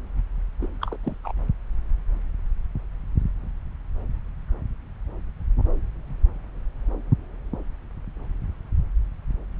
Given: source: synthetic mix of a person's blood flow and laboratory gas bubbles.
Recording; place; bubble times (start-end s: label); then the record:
Doppler ultrasound of blood flow; subclavian vein
0.61-0.67 s: bubbles
0.81-0.97 s: bubbles
1.03-1.17 s: bubbles
1.24-1.32 s: bubbles
From the record:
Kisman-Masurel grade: 221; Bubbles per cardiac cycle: several, 3 to 8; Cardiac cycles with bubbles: 10 to 50%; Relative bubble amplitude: barely perceptible (0.100 to 0.250); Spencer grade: 2 (many but less than half of the cardiac periods contain bubble signals, singularly or in groups); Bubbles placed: anywhere in the cardiac cycle